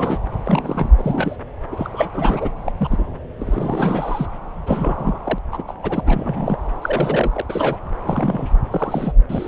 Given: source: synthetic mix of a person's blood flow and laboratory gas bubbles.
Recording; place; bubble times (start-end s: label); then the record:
Doppler ultrasound of blood flow; subclavian vein
0.00-0.18 s: bubbles
0.46-0.90 s: bubbles
0.98-1.36 s: bubbles
1.71-2.50 s: bubbles
2.65-2.72 s: bubbles
2.77-3.05 s: bubbles
3.39-4.27 s: bubbles
4.66-5.20 s: bubbles
5.24-5.39 s: bubbles
5.52-5.62 s: bubbles
5.67-5.73 s: bubbles
5.83-6.01 s: bubbles
6.06-6.58 s: bubbles
6.82-7.42 s: bubbles
7.49-7.78 s: bubbles
8.05-8.51 s: bubbles
8.71-9.12 s: bubbles
9.29-9.47 s: bubbles
From the record:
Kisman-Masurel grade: 242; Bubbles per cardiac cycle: several, 3 to 8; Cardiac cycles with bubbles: 100%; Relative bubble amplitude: moderate (0.250 to 0.450); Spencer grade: 3 (all of the cardiac periods contain showers or single bubble signals, but not dominating or overriding the cardiac motion signals); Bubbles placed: anywhere in the cardiac cycle